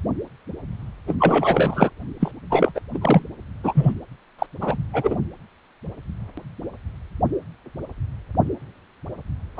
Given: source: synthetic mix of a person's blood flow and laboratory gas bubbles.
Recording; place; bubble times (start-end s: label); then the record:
Doppler ultrasound of blood flow; precordium
1.07-1.16 s: bubbles
1.19-1.90 s: bubbles
2.19-2.31 s: bubbles
2.50-2.72 s: bubbles
2.75-2.81 s: bubbles
2.94-3.23 s: bubbles
3.63-3.94 s: bubbles
4.39-4.47 s: bubbles
4.61-4.78 s: bubbles
4.93-5.17 s: bubbles
9.56-9.60 s: bubbles
From the record:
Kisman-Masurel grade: 333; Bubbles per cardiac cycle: rolling drumbeat, 9 or more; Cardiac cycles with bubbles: 50 to 99%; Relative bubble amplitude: loud (0.450 to 0.775); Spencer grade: 3 (all of the cardiac periods contain showers or single bubble signals, but not dominating or overriding the cardiac motion signals); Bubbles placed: anywhere in the cardiac cycle